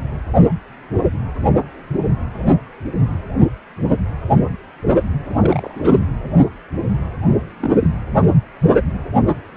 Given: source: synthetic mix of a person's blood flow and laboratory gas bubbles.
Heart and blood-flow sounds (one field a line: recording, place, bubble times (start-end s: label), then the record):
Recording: Doppler ultrasound of blood flow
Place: precordium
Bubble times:
5.29-5.36 s: bubbles
5.39-5.99 s: bubbles
7.60-7.94 s: bubbles
From the record:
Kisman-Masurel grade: 221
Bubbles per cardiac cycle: several, 3 to 8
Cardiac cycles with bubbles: 10 to 50%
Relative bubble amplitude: barely perceptible (0.100 to 0.250)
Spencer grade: 2 (many but less than half of the cardiac periods contain bubble signals, singularly or in groups)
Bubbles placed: anywhere in the cardiac cycle